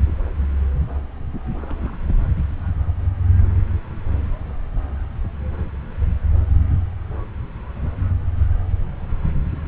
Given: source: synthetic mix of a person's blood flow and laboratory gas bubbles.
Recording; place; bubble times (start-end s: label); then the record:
Doppler ultrasound of blood flow; subclavian vein
1.58-1.96 s: bubbles
2.08-2.29 s: bubbles
From the record:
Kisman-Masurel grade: 111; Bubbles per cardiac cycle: 1 to 2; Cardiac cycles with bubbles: 1 to 10%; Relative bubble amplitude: barely perceptible (0.100 to 0.250); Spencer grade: 1 (occasional bubble signal discernible with the cardiac motion signal, with majority of cardiac periods free of bubbles); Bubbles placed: anywhere in the cardiac cycle